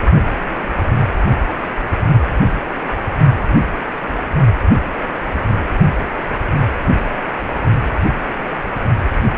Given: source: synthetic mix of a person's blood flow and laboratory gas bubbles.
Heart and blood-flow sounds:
Doppler ultrasound of blood flow; precordium
0.43-0.66 s: bubbles
1.91-1.97 s: bubbles
2.96-3.01 s: bubbles
From the record:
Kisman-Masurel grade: 121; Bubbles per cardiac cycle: 1 to 2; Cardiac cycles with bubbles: 10 to 50%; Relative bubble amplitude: barely perceptible (0.100 to 0.250); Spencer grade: 2 (many but less than half of the cardiac periods contain bubble signals, singularly or in groups); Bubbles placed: only in the low amplitude regions of the cardiac cycle

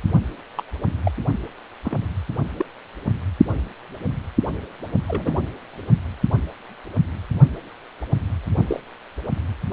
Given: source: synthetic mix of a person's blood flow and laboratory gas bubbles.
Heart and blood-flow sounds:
Doppler ultrasound of blood flow; precordium
0.57-0.64 s: bubbles
1.04-1.11 s: bubbles
1.85-1.98 s: bubbles
2.57-2.66 s: bubbles
5.07-5.43 s: bubbles
8.67-8.80 s: bubbles
9.71-9.73 s: bubbles
From the record:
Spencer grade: 2 (many but less than half of the cardiac periods contain bubble signals, singularly or in groups); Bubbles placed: only in the low amplitude regions of the cardiac cycle

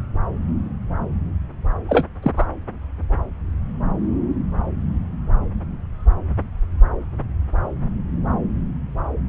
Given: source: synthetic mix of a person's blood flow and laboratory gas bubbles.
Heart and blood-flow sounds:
Doppler ultrasound of blood flow; subclavian vein
1.89-2.05 s: bubbles
2.23-2.31 s: bubbles
2.37-2.46 s: bubbles
From the record:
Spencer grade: 1 (occasional bubble signal discernible with the cardiac motion signal, with majority of cardiac periods free of bubbles); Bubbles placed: anywhere in the cardiac cycle

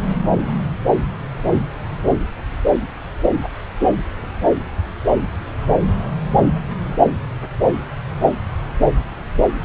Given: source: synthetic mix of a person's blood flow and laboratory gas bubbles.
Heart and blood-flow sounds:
Doppler ultrasound of blood flow; subclavian vein
no bubbles
From the record:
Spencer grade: 0 (complete lack of bubble signals)

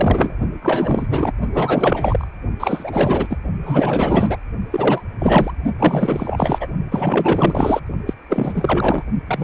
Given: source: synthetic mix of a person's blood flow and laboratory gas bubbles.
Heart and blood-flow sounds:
Doppler ultrasound of blood flow; precordium
0.00-0.36 s: bubbles
0.62-1.07 s: bubbles
1.10-1.33 s: bubbles
1.53-2.27 s: bubbles
2.59-3.38 s: bubbles
3.62-4.38 s: bubbles
4.71-5.02 s: bubbles
5.19-5.52 s: bubbles
5.79-6.67 s: bubbles
6.91-7.80 s: bubbles
8.06-8.14 s: bubbles
8.29-9.04 s: bubbles
9.27-9.44 s: bubbles
From the record:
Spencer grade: 4 (maximum detectable bubble signal sounding continuously throughout systole and diastole of every cardiac period, and overriding the amplitude of the normal cardiac signals); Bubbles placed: only in the low amplitude regions of the cardiac cycle

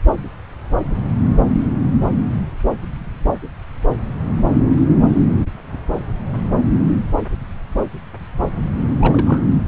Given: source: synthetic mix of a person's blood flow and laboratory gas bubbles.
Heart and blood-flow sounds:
Doppler ultrasound of blood flow; subclavian vein
9.00-9.42 s: bubbles
From the record:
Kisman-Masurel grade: 122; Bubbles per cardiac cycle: 1 to 2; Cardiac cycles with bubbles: 10 to 50%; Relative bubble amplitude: moderate (0.250 to 0.450); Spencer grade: 2 (many but less than half of the cardiac periods contain bubble signals, singularly or in groups); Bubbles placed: anywhere in the cardiac cycle

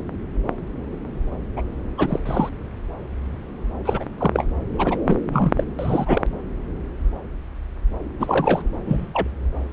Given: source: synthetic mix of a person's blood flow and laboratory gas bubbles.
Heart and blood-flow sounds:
Doppler ultrasound of blood flow; subclavian vein
0.00-0.02 s: bubbles
1.56-1.64 s: bubbles
1.98-2.19 s: bubbles
2.25-2.49 s: bubbles
3.85-4.06 s: bubbles
4.18-4.46 s: bubbles
4.78-4.97 s: bubbles
5.06-5.18 s: bubbles
5.28-5.52 s: bubbles
5.56-5.64 s: bubbles
5.78-6.22 s: bubbles
8.20-8.62 s: bubbles
8.86-9.28 s: bubbles
From the record:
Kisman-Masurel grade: 233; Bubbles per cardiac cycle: several, 3 to 8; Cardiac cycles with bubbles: 50 to 99%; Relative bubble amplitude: loud (0.450 to 0.775); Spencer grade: 3 (all of the cardiac periods contain showers or single bubble signals, but not dominating or overriding the cardiac motion signals); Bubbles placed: anywhere in the cardiac cycle

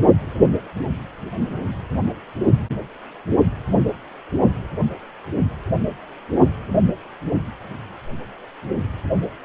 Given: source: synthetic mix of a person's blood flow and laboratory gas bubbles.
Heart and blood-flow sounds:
Doppler ultrasound of blood flow; precordium
6.67-6.79 s: bubbles
9.43-9.45 s: bubbles
From the record:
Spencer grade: 2 (many but less than half of the cardiac periods contain bubble signals, singularly or in groups); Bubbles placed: only in the low amplitude regions of the cardiac cycle

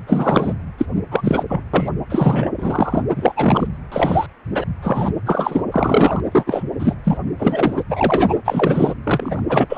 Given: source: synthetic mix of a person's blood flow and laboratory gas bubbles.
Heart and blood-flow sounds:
Doppler ultrasound of blood flow; precordium
0.07-0.53 s: bubbles
0.78-0.85 s: bubbles
1.11-1.44 s: bubbles
1.48-1.62 s: bubbles
1.73-1.90 s: bubbles
2.09-2.50 s: bubbles
2.57-3.02 s: bubbles
3.16-3.68 s: bubbles
3.92-4.27 s: bubbles
4.52-4.64 s: bubbles
4.82-5.13 s: bubbles
5.26-5.63 s: bubbles
5.72-6.21 s: bubbles
6.32-6.63 s: bubbles
6.79-6.94 s: bubbles
7.04-7.18 s: bubbles
7.39-7.83 s: bubbles
7.89-8.34 s: bubbles
8.45-8.93 s: bubbles
9.04-9.43 s: bubbles
9.48-9.78 s: bubbles
From the record:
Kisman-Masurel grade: 243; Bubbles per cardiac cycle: several, 3 to 8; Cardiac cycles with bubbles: 100%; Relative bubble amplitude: loud (0.450 to 0.775); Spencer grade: 3 (all of the cardiac periods contain showers or single bubble signals, but not dominating or overriding the cardiac motion signals); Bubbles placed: anywhere in the cardiac cycle

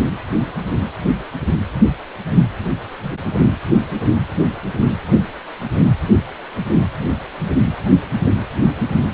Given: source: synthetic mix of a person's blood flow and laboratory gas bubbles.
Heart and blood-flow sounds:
Doppler ultrasound of blood flow; precordium
no bubbles
From the record:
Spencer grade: 0 (complete lack of bubble signals)

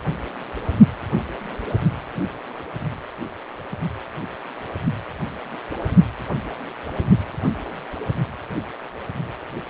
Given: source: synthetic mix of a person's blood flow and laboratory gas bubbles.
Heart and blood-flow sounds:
Doppler ultrasound of blood flow; precordium
no bubbles
From the record:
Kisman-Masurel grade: 000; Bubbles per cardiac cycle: 0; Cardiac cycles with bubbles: 0%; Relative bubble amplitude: no bubbles discernible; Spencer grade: 0 (complete lack of bubble signals)

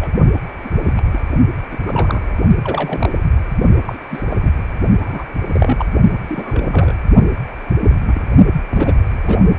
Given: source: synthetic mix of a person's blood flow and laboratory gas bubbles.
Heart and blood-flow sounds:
Doppler ultrasound of blood flow; precordium
0.01-0.10 s: bubbles
0.64-0.68 s: bubbles
0.85-0.94 s: bubbles
0.96-1.01 s: bubbles
1.12-1.23 s: bubbles
1.71-1.77 s: bubbles
1.85-2.31 s: bubbles
2.63-3.24 s: bubbles
3.85-3.99 s: bubbles
4.08-4.24 s: bubbles
4.29-4.37 s: bubbles
4.42-4.51 s: bubbles
5.00-5.25 s: bubbles
5.52-5.86 s: bubbles
6.27-6.94 s: bubbles
7.79-7.95 s: bubbles
8.07-8.22 s: bubbles
8.70-8.95 s: bubbles
9.05-9.54 s: bubbles
From the record:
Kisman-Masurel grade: 242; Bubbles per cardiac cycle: several, 3 to 8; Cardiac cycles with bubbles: 100%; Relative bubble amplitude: moderate (0.250 to 0.450); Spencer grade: 3 (all of the cardiac periods contain showers or single bubble signals, but not dominating or overriding the cardiac motion signals); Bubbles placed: only in the low amplitude regions of the cardiac cycle

